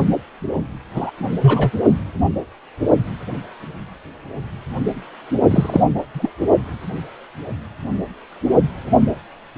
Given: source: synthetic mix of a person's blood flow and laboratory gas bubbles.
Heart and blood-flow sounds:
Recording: Doppler ultrasound of blood flow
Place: precordium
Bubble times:
0.94-1.11 s: bubbles
1.41-1.70 s: bubbles
5.50-5.83 s: bubbles
6.13-6.30 s: bubbles
From the record:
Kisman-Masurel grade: 223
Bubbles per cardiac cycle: several, 3 to 8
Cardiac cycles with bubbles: 10 to 50%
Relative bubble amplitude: loud (0.450 to 0.775)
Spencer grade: 2 (many but less than half of the cardiac periods contain bubble signals, singularly or in groups)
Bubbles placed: only in the low amplitude regions of the cardiac cycle

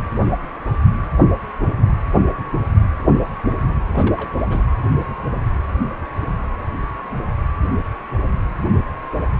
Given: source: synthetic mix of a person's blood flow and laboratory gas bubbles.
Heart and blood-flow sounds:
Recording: Doppler ultrasound of blood flow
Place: precordium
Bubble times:
3.92-4.36 s: bubbles
4.38-4.44 s: bubbles
4.49-4.64 s: bubbles
From the record:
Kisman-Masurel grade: 211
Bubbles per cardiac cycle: several, 3 to 8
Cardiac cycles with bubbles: 1 to 10%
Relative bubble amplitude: barely perceptible (0.100 to 0.250)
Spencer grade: 1 (occasional bubble signal discernible with the cardiac motion signal, with majority of cardiac periods free of bubbles)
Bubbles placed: anywhere in the cardiac cycle

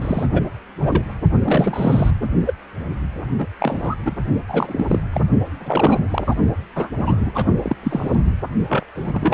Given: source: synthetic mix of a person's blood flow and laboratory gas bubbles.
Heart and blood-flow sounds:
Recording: Doppler ultrasound of blood flow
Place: precordium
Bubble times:
0.01-0.27 s: bubbles
0.33-0.42 s: bubbles
0.80-1.17 s: bubbles
1.44-2.10 s: bubbles
2.21-2.30 s: bubbles
2.46-2.54 s: bubbles
3.38-3.47 s: bubbles
3.59-3.95 s: bubbles
4.05-4.15 s: bubbles
4.48-5.01 s: bubbles
5.13-5.27 s: bubbles
5.60-6.05 s: bubbles
6.10-6.35 s: bubbles
6.76-6.89 s: bubbles
6.98-7.47 s: bubbles
7.62-7.76 s: bubbles
7.83-8.15 s: bubbles
8.68-8.84 s: bubbles
8.95-9.34 s: bubbles
From the record:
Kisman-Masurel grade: 242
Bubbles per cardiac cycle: several, 3 to 8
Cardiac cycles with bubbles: 100%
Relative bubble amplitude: moderate (0.250 to 0.450)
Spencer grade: 3 (all of the cardiac periods contain showers or single bubble signals, but not dominating or overriding the cardiac motion signals)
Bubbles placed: only in the low amplitude regions of the cardiac cycle

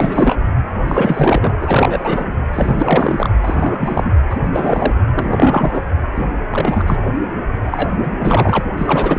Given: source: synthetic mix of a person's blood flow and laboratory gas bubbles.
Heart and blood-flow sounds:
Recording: Doppler ultrasound of blood flow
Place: precordium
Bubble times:
0.00-0.36 s: bubbles
0.87-1.54 s: bubbles
1.59-2.28 s: bubbles
2.53-3.29 s: bubbles
3.41-4.13 s: bubbles
4.29-4.38 s: bubbles
4.43-4.94 s: bubbles
5.13-5.83 s: bubbles
6.16-6.26 s: bubbles
6.50-7.13 s: bubbles
7.62-8.61 s: bubbles
8.77-9.18 s: bubbles
From the record:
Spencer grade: 3 (all of the cardiac periods contain showers or single bubble signals, but not dominating or overriding the cardiac motion signals)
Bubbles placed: anywhere in the cardiac cycle

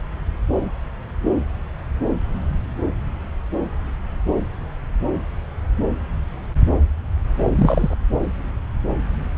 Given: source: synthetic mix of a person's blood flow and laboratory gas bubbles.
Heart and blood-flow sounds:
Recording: Doppler ultrasound of blood flow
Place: subclavian vein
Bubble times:
7.52-7.95 s: bubbles
From the record:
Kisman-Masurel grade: 212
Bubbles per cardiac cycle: several, 3 to 8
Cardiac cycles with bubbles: 1 to 10%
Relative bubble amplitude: moderate (0.250 to 0.450)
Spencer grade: 1 (occasional bubble signal discernible with the cardiac motion signal, with majority of cardiac periods free of bubbles)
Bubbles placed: anywhere in the cardiac cycle

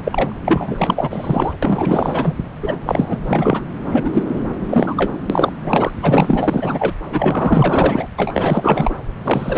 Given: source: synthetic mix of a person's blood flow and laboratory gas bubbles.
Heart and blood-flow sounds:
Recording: Doppler ultrasound of blood flow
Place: subclavian vein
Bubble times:
0.00-0.33 s: bubbles
0.45-1.53 s: bubbles
1.62-2.33 s: bubbles
2.62-2.77 s: bubbles
2.85-3.18 s: bubbles
3.23-3.62 s: bubbles
3.92-4.11 s: bubbles
4.13-4.23 s: bubbles
4.33-4.44 s: bubbles
4.69-5.12 s: bubbles
5.29-5.52 s: bubbles
5.64-5.91 s: bubbles
6.02-6.92 s: bubbles
7.11-8.09 s: bubbles
8.18-8.96 s: bubbles
9.23-9.58 s: bubbles
From the record:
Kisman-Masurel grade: 444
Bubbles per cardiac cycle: continuous sound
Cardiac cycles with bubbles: 100%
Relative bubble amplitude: maximal (0.775 to 0.999)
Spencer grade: 4 (maximum detectable bubble signal sounding continuously throughout systole and diastole of every cardiac period, and overriding the amplitude of the normal cardiac signals)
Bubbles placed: anywhere in the cardiac cycle

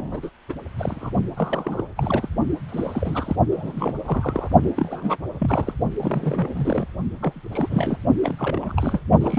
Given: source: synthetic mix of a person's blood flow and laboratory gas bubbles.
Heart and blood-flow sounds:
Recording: Doppler ultrasound of blood flow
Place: precordium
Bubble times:
0.00-0.30 s: bubbles
0.49-0.53 s: bubbles
0.78-1.10 s: bubbles
1.36-1.84 s: bubbles
1.97-2.28 s: bubbles
2.68-3.36 s: bubbles
3.51-3.93 s: bubbles
4.06-4.48 s: bubbles
4.63-4.71 s: bubbles
4.76-5.17 s: bubbles
5.39-5.73 s: bubbles
5.96-6.85 s: bubbles
7.21-7.41 s: bubbles
7.51-7.99 s: bubbles
8.21-8.35 s: bubbles
8.38-9.01 s: bubbles
9.21-9.39 s: bubbles
From the record:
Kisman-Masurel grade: 342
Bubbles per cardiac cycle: rolling drumbeat, 9 or more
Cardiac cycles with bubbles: 100%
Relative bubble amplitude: moderate (0.250 to 0.450)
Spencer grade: 3 (all of the cardiac periods contain showers or single bubble signals, but not dominating or overriding the cardiac motion signals)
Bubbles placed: only in the low amplitude regions of the cardiac cycle

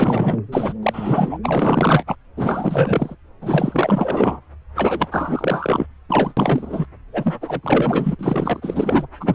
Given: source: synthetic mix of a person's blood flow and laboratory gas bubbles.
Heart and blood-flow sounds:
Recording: Doppler ultrasound of blood flow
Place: subclavian vein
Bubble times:
0.00-0.41 s: bubbles
0.52-0.73 s: bubbles
0.83-1.38 s: bubbles
1.42-2.04 s: bubbles
2.06-2.16 s: bubbles
2.37-3.16 s: bubbles
3.41-4.41 s: bubbles
4.75-5.87 s: bubbles
6.09-6.33 s: bubbles
6.37-6.87 s: bubbles
7.12-7.36 s: bubbles
7.41-8.15 s: bubbles
8.19-9.08 s: bubbles
9.20-9.35 s: bubbles
From the record:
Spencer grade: 4 (maximum detectable bubble signal sounding continuously throughout systole and diastole of every cardiac period, and overriding the amplitude of the normal cardiac signals)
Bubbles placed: anywhere in the cardiac cycle

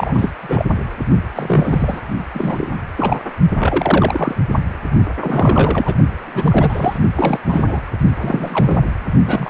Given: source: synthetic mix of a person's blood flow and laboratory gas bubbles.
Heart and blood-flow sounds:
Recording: Doppler ultrasound of blood flow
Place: precordium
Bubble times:
0.00-0.32 s: bubbles
0.40-0.65 s: bubbles
1.35-2.00 s: bubbles
2.34-2.67 s: bubbles
2.95-3.20 s: bubbles
3.58-4.35 s: bubbles
5.21-5.96 s: bubbles
6.26-6.98 s: bubbles
7.15-7.40 s: bubbles
7.45-7.81 s: bubbles
8.21-8.82 s: bubbles
9.26-9.50 s: bubbles
From the record:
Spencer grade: 3 (all of the cardiac periods contain showers or single bubble signals, but not dominating or overriding the cardiac motion signals)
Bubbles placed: only in the low amplitude regions of the cardiac cycle

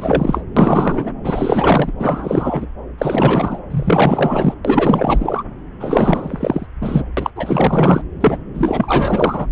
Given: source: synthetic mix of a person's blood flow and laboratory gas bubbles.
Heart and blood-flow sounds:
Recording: Doppler ultrasound of blood flow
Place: subclavian vein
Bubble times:
0.00-0.43 s: bubbles
0.56-1.10 s: bubbles
1.24-1.92 s: bubbles
1.99-2.66 s: bubbles
2.98-3.60 s: bubbles
3.70-4.54 s: bubbles
4.65-5.43 s: bubbles
5.79-6.66 s: bubbles
6.81-7.04 s: bubbles
7.17-7.30 s: bubbles
7.36-8.02 s: bubbles
8.20-8.38 s: bubbles
8.54-9.46 s: bubbles
From the record:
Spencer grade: 4 (maximum detectable bubble signal sounding continuously throughout systole and diastole of every cardiac period, and overriding the amplitude of the normal cardiac signals)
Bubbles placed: anywhere in the cardiac cycle

